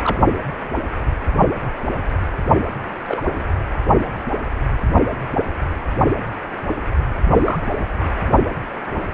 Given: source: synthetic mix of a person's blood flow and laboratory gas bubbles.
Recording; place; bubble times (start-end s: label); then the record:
Doppler ultrasound of blood flow; precordium
0.04-0.19 s: bubbles
3.08-3.21 s: bubbles
3.35-3.45 s: bubbles
7.35-7.78 s: bubbles
From the record:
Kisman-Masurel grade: 122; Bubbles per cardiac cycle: 1 to 2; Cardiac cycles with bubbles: 10 to 50%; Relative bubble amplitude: moderate (0.250 to 0.450); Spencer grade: 2 (many but less than half of the cardiac periods contain bubble signals, singularly or in groups); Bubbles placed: only in the low amplitude regions of the cardiac cycle